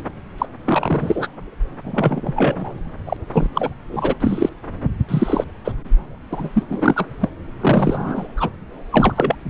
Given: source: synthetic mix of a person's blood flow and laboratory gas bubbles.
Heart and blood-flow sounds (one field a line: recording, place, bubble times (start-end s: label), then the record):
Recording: Doppler ultrasound of blood flow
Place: subclavian vein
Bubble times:
0.38-0.46 s: bubbles
0.65-1.27 s: bubbles
1.84-2.75 s: bubbles
3.05-3.17 s: bubbles
3.33-3.48 s: bubbles
3.55-3.71 s: bubbles
3.92-4.15 s: bubbles
4.20-4.49 s: bubbles
5.08-5.44 s: bubbles
5.64-5.72 s: bubbles
6.33-6.50 s: bubbles
6.53-6.63 s: bubbles
6.69-7.07 s: bubbles
7.20-7.29 s: bubbles
7.60-8.28 s: bubbles
8.36-8.49 s: bubbles
8.90-9.35 s: bubbles
From the record:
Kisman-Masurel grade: 243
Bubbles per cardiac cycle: several, 3 to 8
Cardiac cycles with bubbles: 100%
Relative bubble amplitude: loud (0.450 to 0.775)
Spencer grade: 3 (all of the cardiac periods contain showers or single bubble signals, but not dominating or overriding the cardiac motion signals)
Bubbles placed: anywhere in the cardiac cycle